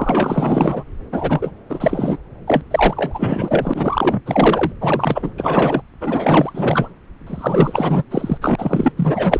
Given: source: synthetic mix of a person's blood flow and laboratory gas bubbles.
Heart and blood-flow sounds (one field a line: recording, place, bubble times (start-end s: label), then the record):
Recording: Doppler ultrasound of blood flow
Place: subclavian vein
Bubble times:
0.00-0.83 s: bubbles
1.12-1.51 s: bubbles
1.69-2.17 s: bubbles
2.46-2.63 s: bubbles
2.70-4.21 s: bubbles
4.26-4.72 s: bubbles
4.81-5.31 s: bubbles
5.37-5.82 s: bubbles
6.00-6.93 s: bubbles
7.27-8.04 s: bubbles
8.11-8.38 s: bubbles
8.41-8.92 s: bubbles
8.96-9.40 s: bubbles
From the record:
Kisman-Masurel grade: 444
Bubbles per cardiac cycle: continuous sound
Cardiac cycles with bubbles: 100%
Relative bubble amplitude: maximal (0.775 to 0.999)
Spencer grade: 4 (maximum detectable bubble signal sounding continuously throughout systole and diastole of every cardiac period, and overriding the amplitude of the normal cardiac signals)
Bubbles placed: anywhere in the cardiac cycle